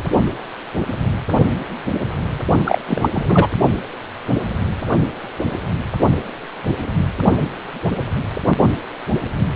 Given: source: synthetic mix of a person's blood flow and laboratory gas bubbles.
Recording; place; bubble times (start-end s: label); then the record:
Doppler ultrasound of blood flow; precordium
2.64-2.81 s: bubbles
2.87-3.10 s: bubbles
3.15-3.48 s: bubbles
From the record:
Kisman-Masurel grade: 213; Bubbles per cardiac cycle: several, 3 to 8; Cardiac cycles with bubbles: 1 to 10%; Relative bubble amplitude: loud (0.450 to 0.775); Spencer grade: 1 (occasional bubble signal discernible with the cardiac motion signal, with majority of cardiac periods free of bubbles); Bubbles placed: only in the low amplitude regions of the cardiac cycle